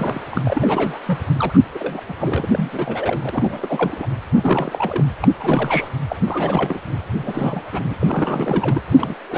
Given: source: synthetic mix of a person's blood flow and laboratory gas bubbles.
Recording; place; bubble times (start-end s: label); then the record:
Doppler ultrasound of blood flow; precordium
0.00-0.20 s: bubbles
0.31-0.98 s: bubbles
1.05-1.19 s: bubbles
1.39-1.58 s: bubbles
1.75-2.02 s: bubbles
2.08-2.13 s: bubbles
2.18-4.06 s: bubbles
4.33-5.04 s: bubbles
5.21-5.28 s: bubbles
5.40-5.89 s: bubbles
6.08-6.16 s: bubbles
6.28-6.79 s: bubbles
7.18-7.64 s: bubbles
7.72-7.95 s: bubbles
8.00-8.82 s: bubbles
8.97-9.14 s: bubbles
9.29-9.38 s: bubbles
From the record:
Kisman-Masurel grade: 342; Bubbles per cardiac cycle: rolling drumbeat, 9 or more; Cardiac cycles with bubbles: 100%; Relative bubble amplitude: moderate (0.250 to 0.450); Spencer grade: 3 (all of the cardiac periods contain showers or single bubble signals, but not dominating or overriding the cardiac motion signals); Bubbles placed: anywhere in the cardiac cycle